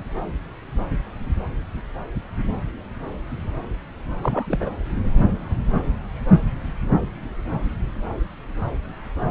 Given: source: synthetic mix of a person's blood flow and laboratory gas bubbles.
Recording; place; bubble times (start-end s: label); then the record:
Doppler ultrasound of blood flow; subclavian vein
4.21-4.69 s: bubbles
From the record:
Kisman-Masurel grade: 212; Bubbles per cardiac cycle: several, 3 to 8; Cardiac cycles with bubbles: 1 to 10%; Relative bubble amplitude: moderate (0.250 to 0.450); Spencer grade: 1 (occasional bubble signal discernible with the cardiac motion signal, with majority of cardiac periods free of bubbles); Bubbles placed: anywhere in the cardiac cycle